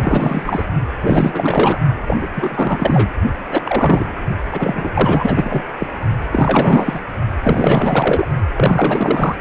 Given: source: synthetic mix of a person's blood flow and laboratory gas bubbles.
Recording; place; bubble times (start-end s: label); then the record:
Doppler ultrasound of blood flow; precordium
0.00-0.68 s: bubbles
1.01-1.78 s: bubbles
2.07-2.17 s: bubbles
2.21-2.28 s: bubbles
2.37-3.11 s: bubbles
3.50-3.62 s: bubbles
3.65-4.09 s: bubbles
4.52-5.62 s: bubbles
5.79-5.87 s: bubbles
6.32-7.00 s: bubbles
7.43-8.28 s: bubbles
8.53-9.36 s: bubbles
From the record:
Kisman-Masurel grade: 444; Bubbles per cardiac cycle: continuous sound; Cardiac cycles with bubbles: 100%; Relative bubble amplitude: maximal (0.775 to 0.999); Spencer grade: 4 (maximum detectable bubble signal sounding continuously throughout systole and diastole of every cardiac period, and overriding the amplitude of the normal cardiac signals); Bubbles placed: only in the low amplitude regions of the cardiac cycle